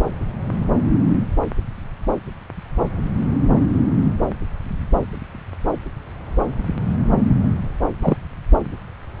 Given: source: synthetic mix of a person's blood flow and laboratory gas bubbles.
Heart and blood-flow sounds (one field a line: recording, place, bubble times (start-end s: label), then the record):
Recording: Doppler ultrasound of blood flow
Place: subclavian vein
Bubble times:
8.01-8.16 s: bubbles
From the record:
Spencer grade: 1 (occasional bubble signal discernible with the cardiac motion signal, with majority of cardiac periods free of bubbles)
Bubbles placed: anywhere in the cardiac cycle